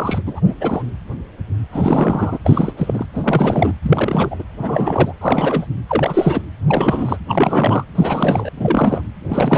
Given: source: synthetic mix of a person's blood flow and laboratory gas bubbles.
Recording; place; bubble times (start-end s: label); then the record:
Doppler ultrasound of blood flow; precordium
0.00-0.21 s: bubbles
0.26-0.41 s: bubbles
0.44-0.54 s: bubbles
0.60-0.83 s: bubbles
1.71-2.38 s: bubbles
2.44-2.73 s: bubbles
2.77-3.06 s: bubbles
3.13-3.72 s: bubbles
3.82-4.43 s: bubbles
4.61-5.13 s: bubbles
5.21-5.66 s: bubbles
5.88-6.42 s: bubbles
6.68-7.17 s: bubbles
7.28-7.84 s: bubbles
7.95-8.50 s: bubbles
8.56-9.01 s: bubbles
9.29-9.58 s: bubbles
From the record:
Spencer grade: 3 (all of the cardiac periods contain showers or single bubble signals, but not dominating or overriding the cardiac motion signals); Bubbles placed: anywhere in the cardiac cycle